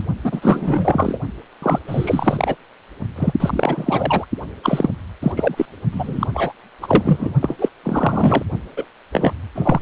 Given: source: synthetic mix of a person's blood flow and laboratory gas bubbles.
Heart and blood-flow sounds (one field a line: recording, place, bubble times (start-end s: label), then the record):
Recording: Doppler ultrasound of blood flow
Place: precordium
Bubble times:
0.23-1.19 s: bubbles
1.62-1.79 s: bubbles
1.88-2.55 s: bubbles
3.16-3.32 s: bubbles
3.40-4.25 s: bubbles
4.62-4.90 s: bubbles
5.22-5.32 s: bubbles
5.36-5.66 s: bubbles
5.92-6.27 s: bubbles
6.34-6.52 s: bubbles
6.81-7.33 s: bubbles
7.41-7.56 s: bubbles
7.59-7.68 s: bubbles
7.83-8.43 s: bubbles
8.76-8.86 s: bubbles
9.12-9.33 s: bubbles
9.55-9.79 s: bubbles
From the record:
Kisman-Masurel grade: 343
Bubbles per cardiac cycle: rolling drumbeat, 9 or more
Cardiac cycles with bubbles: 100%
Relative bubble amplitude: loud (0.450 to 0.775)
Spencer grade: 3 (all of the cardiac periods contain showers or single bubble signals, but not dominating or overriding the cardiac motion signals)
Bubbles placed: only in the low amplitude regions of the cardiac cycle